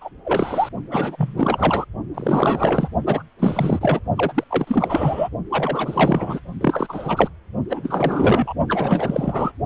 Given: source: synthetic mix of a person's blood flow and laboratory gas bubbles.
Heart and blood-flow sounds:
Doppler ultrasound of blood flow; precordium
0.00-0.10 s: bubbles
0.24-0.69 s: bubbles
0.90-1.85 s: bubbles
2.14-2.89 s: bubbles
3.06-3.23 s: bubbles
3.39-4.00 s: bubbles
4.16-4.44 s: bubbles
4.50-5.29 s: bubbles
5.50-6.40 s: bubbles
6.60-7.30 s: bubbles
7.68-8.54 s: bubbles
8.68-9.52 s: bubbles
From the record:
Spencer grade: 4 (maximum detectable bubble signal sounding continuously throughout systole and diastole of every cardiac period, and overriding the amplitude of the normal cardiac signals); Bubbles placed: only in the low amplitude regions of the cardiac cycle

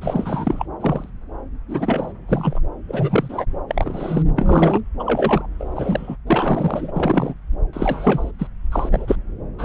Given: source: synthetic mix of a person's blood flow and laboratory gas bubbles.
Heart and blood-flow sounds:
Doppler ultrasound of blood flow; subclavian vein
0.01-0.66 s: bubbles
0.80-1.09 s: bubbles
1.68-2.12 s: bubbles
2.28-2.60 s: bubbles
2.88-3.46 s: bubbles
3.68-4.22 s: bubbles
4.36-4.80 s: bubbles
4.99-5.47 s: bubbles
5.59-6.16 s: bubbles
6.26-7.33 s: bubbles
7.73-8.31 s: bubbles
8.38-8.47 s: bubbles
8.72-9.15 s: bubbles
9.58-9.65 s: bubbles
From the record:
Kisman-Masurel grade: 242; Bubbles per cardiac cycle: several, 3 to 8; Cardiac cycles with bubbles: 100%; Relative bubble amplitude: moderate (0.250 to 0.450); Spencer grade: 3 (all of the cardiac periods contain showers or single bubble signals, but not dominating or overriding the cardiac motion signals); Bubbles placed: anywhere in the cardiac cycle

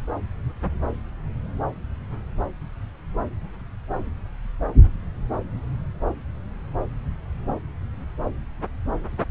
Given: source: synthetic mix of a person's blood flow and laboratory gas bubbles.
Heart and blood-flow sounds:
Doppler ultrasound of blood flow; subclavian vein
no bubbles
From the record:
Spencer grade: 0 (complete lack of bubble signals)

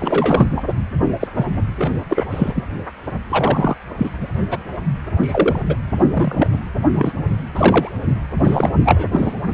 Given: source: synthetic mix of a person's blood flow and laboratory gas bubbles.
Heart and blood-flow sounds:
Doppler ultrasound of blood flow; precordium
0.00-0.46 s: bubbles
0.56-0.63 s: bubbles
1.20-1.27 s: bubbles
1.35-1.47 s: bubbles
1.77-1.92 s: bubbles
2.09-2.25 s: bubbles
2.30-2.52 s: bubbles
2.54-2.64 s: bubbles
3.29-3.75 s: bubbles
3.97-4.10 s: bubbles
4.21-4.28 s: bubbles
4.50-4.58 s: bubbles
5.20-5.62 s: bubbles
5.68-5.76 s: bubbles
6.14-6.47 s: bubbles
6.95-7.13 s: bubbles
7.55-7.94 s: bubbles
8.44-8.71 s: bubbles
8.85-9.07 s: bubbles
9.12-9.34 s: bubbles
From the record:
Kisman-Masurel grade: 243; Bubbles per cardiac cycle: several, 3 to 8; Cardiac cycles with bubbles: 100%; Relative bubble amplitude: loud (0.450 to 0.775); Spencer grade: 3 (all of the cardiac periods contain showers or single bubble signals, but not dominating or overriding the cardiac motion signals); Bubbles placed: only in the low amplitude regions of the cardiac cycle

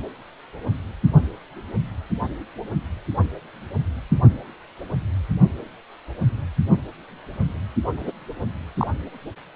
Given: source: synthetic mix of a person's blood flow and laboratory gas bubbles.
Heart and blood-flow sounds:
Doppler ultrasound of blood flow; precordium
7.96-8.12 s: bubbles
8.78-8.87 s: bubbles
From the record:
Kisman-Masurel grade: 112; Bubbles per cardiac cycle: 1 to 2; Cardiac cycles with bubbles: 1 to 10%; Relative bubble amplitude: moderate (0.250 to 0.450); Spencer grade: 1 (occasional bubble signal discernible with the cardiac motion signal, with majority of cardiac periods free of bubbles); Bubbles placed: only in the low amplitude regions of the cardiac cycle

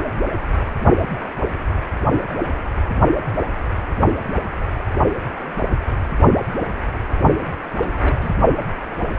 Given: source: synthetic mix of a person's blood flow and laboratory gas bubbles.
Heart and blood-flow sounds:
Doppler ultrasound of blood flow; precordium
7.80-8.35 s: bubbles
From the record:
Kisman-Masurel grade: 111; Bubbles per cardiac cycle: 1 to 2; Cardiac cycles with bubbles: 1 to 10%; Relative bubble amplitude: barely perceptible (0.100 to 0.250); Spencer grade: 1 (occasional bubble signal discernible with the cardiac motion signal, with majority of cardiac periods free of bubbles); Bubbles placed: only in the low amplitude regions of the cardiac cycle

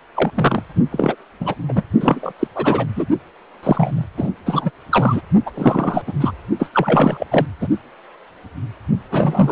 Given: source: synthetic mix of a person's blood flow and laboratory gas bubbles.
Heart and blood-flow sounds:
Doppler ultrasound of blood flow; precordium
0.14-0.31 s: bubbles
0.35-0.63 s: bubbles
0.91-1.16 s: bubbles
1.40-1.54 s: bubbles
1.68-1.72 s: bubbles
1.76-1.83 s: bubbles
2.00-2.33 s: bubbles
2.39-2.47 s: bubbles
2.54-2.86 s: bubbles
2.96-3.06 s: bubbles
3.62-4.05 s: bubbles
4.17-4.30 s: bubbles
4.46-4.71 s: bubbles
4.91-5.21 s: bubbles
5.46-5.51 s: bubbles
5.54-6.03 s: bubbles
6.06-6.12 s: bubbles
6.20-6.33 s: bubbles
6.59-6.70 s: bubbles
6.73-7.27 s: bubbles
7.31-7.46 s: bubbles
7.61-7.68 s: bubbles
9.11-9.52 s: bubbles
From the record:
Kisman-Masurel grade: 333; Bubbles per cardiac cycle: rolling drumbeat, 9 or more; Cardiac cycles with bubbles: 50 to 99%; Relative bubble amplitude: loud (0.450 to 0.775); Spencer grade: 3 (all of the cardiac periods contain showers or single bubble signals, but not dominating or overriding the cardiac motion signals); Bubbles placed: only in the low amplitude regions of the cardiac cycle

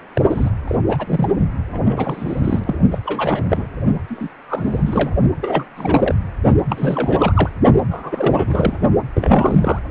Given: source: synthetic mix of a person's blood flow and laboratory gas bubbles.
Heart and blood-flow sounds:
Doppler ultrasound of blood flow; precordium
0.15-0.21 s: bubbles
0.30-0.50 s: bubbles
0.67-0.76 s: bubbles
0.89-1.29 s: bubbles
1.72-2.75 s: bubbles
2.92-2.98 s: bubbles
3.04-3.66 s: bubbles
4.08-4.29 s: bubbles
4.47-5.12 s: bubbles
5.41-5.65 s: bubbles
5.76-6.14 s: bubbles
6.69-7.50 s: bubbles
7.91-8.78 s: bubbles
9.15-9.79 s: bubbles
From the record:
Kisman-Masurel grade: 342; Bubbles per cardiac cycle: rolling drumbeat, 9 or more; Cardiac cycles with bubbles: 100%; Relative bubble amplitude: moderate (0.250 to 0.450); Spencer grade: 3 (all of the cardiac periods contain showers or single bubble signals, but not dominating or overriding the cardiac motion signals); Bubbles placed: only in the low amplitude regions of the cardiac cycle

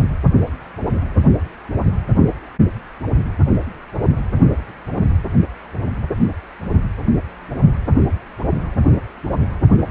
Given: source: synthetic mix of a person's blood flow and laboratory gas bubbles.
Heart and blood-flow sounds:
Doppler ultrasound of blood flow; precordium
no bubbles
From the record:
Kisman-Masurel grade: 000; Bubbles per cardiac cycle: 0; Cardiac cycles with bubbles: 0%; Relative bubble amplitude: no bubbles discernible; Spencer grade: 0 (complete lack of bubble signals)

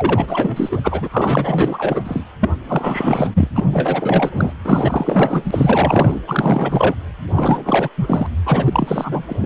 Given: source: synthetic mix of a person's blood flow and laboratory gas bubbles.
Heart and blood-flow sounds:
Doppler ultrasound of blood flow; precordium
0.00-1.09 s: bubbles
1.11-2.24 s: bubbles
2.40-2.49 s: bubbles
2.62-3.30 s: bubbles
3.34-3.48 s: bubbles
3.54-4.53 s: bubbles
4.64-6.21 s: bubbles
6.28-6.95 s: bubbles
7.32-7.88 s: bubbles
7.97-8.29 s: bubbles
8.45-9.46 s: bubbles
From the record:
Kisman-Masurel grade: 444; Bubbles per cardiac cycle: continuous sound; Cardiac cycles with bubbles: 100%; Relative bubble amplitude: maximal (0.775 to 0.999); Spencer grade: 4 (maximum detectable bubble signal sounding continuously throughout systole and diastole of every cardiac period, and overriding the amplitude of the normal cardiac signals); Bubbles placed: anywhere in the cardiac cycle

